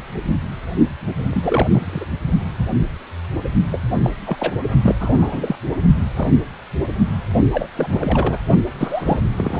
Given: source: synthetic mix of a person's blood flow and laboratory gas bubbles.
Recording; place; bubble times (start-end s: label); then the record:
Doppler ultrasound of blood flow; precordium
1.30-2.05 s: bubbles
3.71-3.80 s: bubbles
4.03-4.10 s: bubbles
4.26-4.53 s: bubbles
4.83-4.95 s: bubbles
4.99-5.56 s: bubbles
6.16-6.31 s: bubbles
7.52-7.68 s: bubbles
7.75-8.38 s: bubbles
8.78-9.20 s: bubbles
9.37-9.60 s: bubbles
From the record:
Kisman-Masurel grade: 232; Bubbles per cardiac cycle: several, 3 to 8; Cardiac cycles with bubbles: 50 to 99%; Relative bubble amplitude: moderate (0.250 to 0.450); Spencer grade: 3 (all of the cardiac periods contain showers or single bubble signals, but not dominating or overriding the cardiac motion signals); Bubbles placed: only in the low amplitude regions of the cardiac cycle